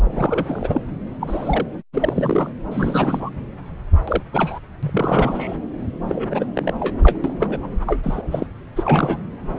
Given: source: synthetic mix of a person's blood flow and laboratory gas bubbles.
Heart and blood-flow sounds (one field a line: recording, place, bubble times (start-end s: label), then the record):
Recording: Doppler ultrasound of blood flow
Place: subclavian vein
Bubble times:
0.12-0.81 s: bubbles
1.20-1.67 s: bubbles
1.94-2.50 s: bubbles
2.71-3.30 s: bubbles
4.08-4.21 s: bubbles
4.33-4.59 s: bubbles
4.83-5.57 s: bubbles
6.04-6.46 s: bubbles
6.54-6.72 s: bubbles
6.79-6.96 s: bubbles
7.03-7.17 s: bubbles
7.24-7.68 s: bubbles
7.81-8.22 s: bubbles
8.27-8.46 s: bubbles
8.76-9.19 s: bubbles
From the record:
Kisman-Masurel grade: 342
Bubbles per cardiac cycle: rolling drumbeat, 9 or more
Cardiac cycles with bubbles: 100%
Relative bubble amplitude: moderate (0.250 to 0.450)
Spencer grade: 3 (all of the cardiac periods contain showers or single bubble signals, but not dominating or overriding the cardiac motion signals)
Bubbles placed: anywhere in the cardiac cycle